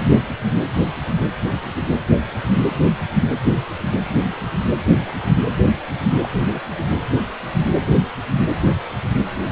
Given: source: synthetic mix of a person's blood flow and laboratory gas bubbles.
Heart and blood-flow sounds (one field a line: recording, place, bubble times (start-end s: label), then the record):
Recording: Doppler ultrasound of blood flow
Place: precordium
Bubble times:
6.23-6.29 s: bubbles
6.46-6.61 s: bubbles
From the record:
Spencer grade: 2 (many but less than half of the cardiac periods contain bubble signals, singularly or in groups)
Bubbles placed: anywhere in the cardiac cycle